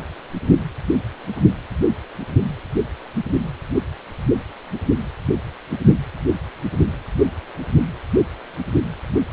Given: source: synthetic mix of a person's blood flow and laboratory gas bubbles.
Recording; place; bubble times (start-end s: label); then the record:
Doppler ultrasound of blood flow; precordium
no bubbles
From the record:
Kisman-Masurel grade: 000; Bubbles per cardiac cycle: 0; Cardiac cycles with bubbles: 0%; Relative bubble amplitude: no bubbles discernible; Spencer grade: 0 (complete lack of bubble signals)